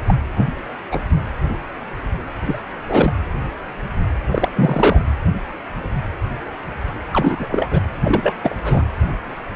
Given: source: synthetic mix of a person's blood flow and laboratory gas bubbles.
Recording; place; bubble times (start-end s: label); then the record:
Doppler ultrasound of blood flow; precordium
0.08-0.15 s: bubbles
0.35-0.46 s: bubbles
0.57-0.60 s: bubbles
0.91-1.00 s: bubbles
2.45-2.59 s: bubbles
2.89-3.12 s: bubbles
4.32-4.50 s: bubbles
4.56-5.02 s: bubbles
7.12-7.79 s: bubbles
8.01-8.39 s: bubbles
8.43-8.55 s: bubbles
8.63-8.84 s: bubbles
From the record:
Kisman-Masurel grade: 223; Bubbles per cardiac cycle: several, 3 to 8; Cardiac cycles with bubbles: 10 to 50%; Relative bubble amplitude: loud (0.450 to 0.775); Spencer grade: 2 (many but less than half of the cardiac periods contain bubble signals, singularly or in groups); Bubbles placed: anywhere in the cardiac cycle